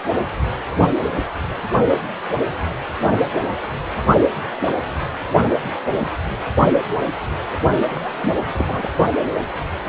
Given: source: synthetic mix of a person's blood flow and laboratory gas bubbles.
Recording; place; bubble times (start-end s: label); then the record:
Doppler ultrasound of blood flow; precordium
7.90-8.12 s: bubbles
8.15-8.65 s: bubbles
8.68-8.93 s: bubbles
From the record:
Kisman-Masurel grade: 212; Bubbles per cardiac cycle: several, 3 to 8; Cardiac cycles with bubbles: 1 to 10%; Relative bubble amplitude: moderate (0.250 to 0.450); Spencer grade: 1 (occasional bubble signal discernible with the cardiac motion signal, with majority of cardiac periods free of bubbles); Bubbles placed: only in the low amplitude regions of the cardiac cycle